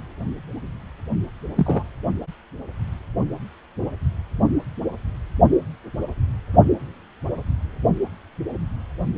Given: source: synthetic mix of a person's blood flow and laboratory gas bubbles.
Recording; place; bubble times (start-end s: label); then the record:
Doppler ultrasound of blood flow; precordium
1.56-1.86 s: bubbles
From the record:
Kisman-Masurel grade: 112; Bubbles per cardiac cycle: 1 to 2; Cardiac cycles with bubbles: 1 to 10%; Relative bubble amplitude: moderate (0.250 to 0.450); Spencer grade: 1 (occasional bubble signal discernible with the cardiac motion signal, with majority of cardiac periods free of bubbles); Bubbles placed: only in the low amplitude regions of the cardiac cycle